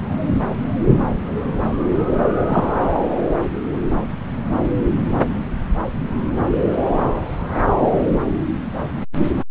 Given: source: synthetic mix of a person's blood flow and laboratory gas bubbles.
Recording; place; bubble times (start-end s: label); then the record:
Doppler ultrasound of blood flow; subclavian vein
2.48-2.64 s: bubbles
From the record:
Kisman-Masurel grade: 113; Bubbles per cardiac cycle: 1 to 2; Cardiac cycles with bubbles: 1 to 10%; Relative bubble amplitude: loud (0.450 to 0.775); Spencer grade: 1 (occasional bubble signal discernible with the cardiac motion signal, with majority of cardiac periods free of bubbles); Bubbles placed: anywhere in the cardiac cycle